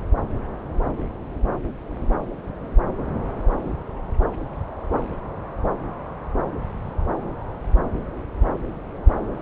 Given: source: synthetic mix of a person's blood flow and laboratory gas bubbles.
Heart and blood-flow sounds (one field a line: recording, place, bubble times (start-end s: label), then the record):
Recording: Doppler ultrasound of blood flow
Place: subclavian vein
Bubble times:
no bubbles
From the record:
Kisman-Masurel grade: 000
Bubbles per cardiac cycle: 0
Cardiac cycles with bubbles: 0%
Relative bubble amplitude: no bubbles discernible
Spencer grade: 0 (complete lack of bubble signals)